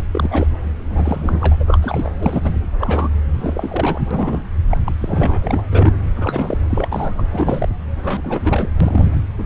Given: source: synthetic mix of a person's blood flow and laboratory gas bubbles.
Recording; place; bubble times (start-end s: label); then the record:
Doppler ultrasound of blood flow; subclavian vein
0.12-0.47 s: bubbles
0.89-1.56 s: bubbles
1.59-2.11 s: bubbles
2.20-2.62 s: bubbles
2.80-3.10 s: bubbles
3.34-4.01 s: bubbles
4.11-4.42 s: bubbles
4.71-4.78 s: bubbles
4.86-4.92 s: bubbles
4.99-5.38 s: bubbles
5.42-5.93 s: bubbles
6.16-6.58 s: bubbles
6.69-6.88 s: bubbles
6.92-7.25 s: bubbles
7.31-7.69 s: bubbles
8.04-8.69 s: bubbles
8.80-9.17 s: bubbles
9.38-9.46 s: bubbles
From the record:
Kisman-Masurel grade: 342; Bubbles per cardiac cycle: rolling drumbeat, 9 or more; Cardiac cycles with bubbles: 100%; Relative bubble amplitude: moderate (0.250 to 0.450); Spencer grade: 3 (all of the cardiac periods contain showers or single bubble signals, but not dominating or overriding the cardiac motion signals); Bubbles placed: anywhere in the cardiac cycle